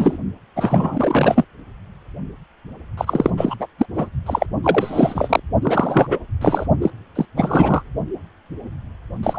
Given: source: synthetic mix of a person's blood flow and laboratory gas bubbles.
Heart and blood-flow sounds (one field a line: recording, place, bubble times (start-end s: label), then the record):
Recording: Doppler ultrasound of blood flow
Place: precordium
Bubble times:
0.00-0.18 s: bubbles
0.55-1.45 s: bubbles
2.97-3.31 s: bubbles
3.36-3.55 s: bubbles
3.59-3.67 s: bubbles
3.78-3.86 s: bubbles
3.96-4.09 s: bubbles
4.26-4.46 s: bubbles
4.62-5.40 s: bubbles
5.62-6.17 s: bubbles
6.41-6.66 s: bubbles
6.82-6.91 s: bubbles
7.15-7.25 s: bubbles
7.36-7.82 s: bubbles
9.23-9.39 s: bubbles
From the record:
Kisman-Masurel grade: 333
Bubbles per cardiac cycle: rolling drumbeat, 9 or more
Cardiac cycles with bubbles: 50 to 99%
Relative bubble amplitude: loud (0.450 to 0.775)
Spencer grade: 3 (all of the cardiac periods contain showers or single bubble signals, but not dominating or overriding the cardiac motion signals)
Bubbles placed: only in the low amplitude regions of the cardiac cycle